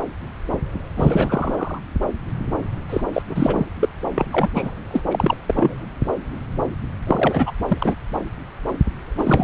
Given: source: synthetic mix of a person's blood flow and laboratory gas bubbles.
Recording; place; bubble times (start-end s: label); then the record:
Doppler ultrasound of blood flow; subclavian vein
0.96-1.79 s: bubbles
2.90-3.01 s: bubbles
3.12-3.22 s: bubbles
3.29-3.66 s: bubbles
3.79-3.89 s: bubbles
4.14-4.51 s: bubbles
4.54-4.71 s: bubbles
4.91-5.02 s: bubbles
5.11-5.37 s: bubbles
5.46-5.83 s: bubbles
7.07-7.51 s: bubbles
7.68-7.78 s: bubbles
7.81-7.95 s: bubbles
9.18-9.44 s: bubbles
From the record:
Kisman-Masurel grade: 332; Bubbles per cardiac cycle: rolling drumbeat, 9 or more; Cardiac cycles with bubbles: 50 to 99%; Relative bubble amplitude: moderate (0.250 to 0.450); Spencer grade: 3 (all of the cardiac periods contain showers or single bubble signals, but not dominating or overriding the cardiac motion signals); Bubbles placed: anywhere in the cardiac cycle